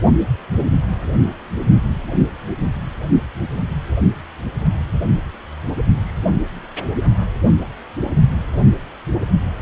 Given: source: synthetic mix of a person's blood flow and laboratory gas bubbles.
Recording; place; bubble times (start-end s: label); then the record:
Doppler ultrasound of blood flow; precordium
6.04-6.37 s: bubbles
From the record:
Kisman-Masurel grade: 112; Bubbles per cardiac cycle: 1 to 2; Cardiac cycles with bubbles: 1 to 10%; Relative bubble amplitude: moderate (0.250 to 0.450); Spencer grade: 1 (occasional bubble signal discernible with the cardiac motion signal, with majority of cardiac periods free of bubbles); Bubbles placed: only in the low amplitude regions of the cardiac cycle